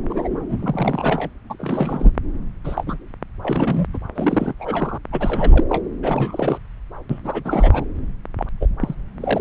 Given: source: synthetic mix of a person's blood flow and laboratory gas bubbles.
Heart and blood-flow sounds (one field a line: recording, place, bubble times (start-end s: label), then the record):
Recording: Doppler ultrasound of blood flow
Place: subclavian vein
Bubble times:
0.09-0.29 s: bubbles
0.31-1.30 s: bubbles
1.50-1.56 s: bubbles
1.59-2.12 s: bubbles
2.63-2.83 s: bubbles
2.86-2.97 s: bubbles
3.42-3.86 s: bubbles
3.93-3.98 s: bubbles
4.15-4.54 s: bubbles
4.59-4.98 s: bubbles
5.12-5.63 s: bubbles
5.69-5.84 s: bubbles
6.02-6.58 s: bubbles
7.09-7.19 s: bubbles
7.23-7.85 s: bubbles
8.38-8.46 s: bubbles
8.60-8.68 s: bubbles
8.79-8.95 s: bubbles
9.20-9.41 s: bubbles
From the record:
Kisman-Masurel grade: 342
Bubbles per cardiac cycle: rolling drumbeat, 9 or more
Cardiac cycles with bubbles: 100%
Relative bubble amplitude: moderate (0.250 to 0.450)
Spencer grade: 3 (all of the cardiac periods contain showers or single bubble signals, but not dominating or overriding the cardiac motion signals)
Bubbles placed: anywhere in the cardiac cycle